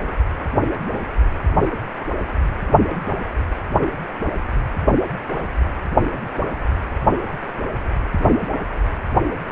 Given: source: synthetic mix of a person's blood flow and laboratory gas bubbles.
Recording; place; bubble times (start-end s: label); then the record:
Doppler ultrasound of blood flow; precordium
2.00-2.06 s: bubbles
From the record:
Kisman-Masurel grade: 111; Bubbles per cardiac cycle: 1 to 2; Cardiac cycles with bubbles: 1 to 10%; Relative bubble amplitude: barely perceptible (0.100 to 0.250); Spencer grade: 1 (occasional bubble signal discernible with the cardiac motion signal, with majority of cardiac periods free of bubbles); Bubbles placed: anywhere in the cardiac cycle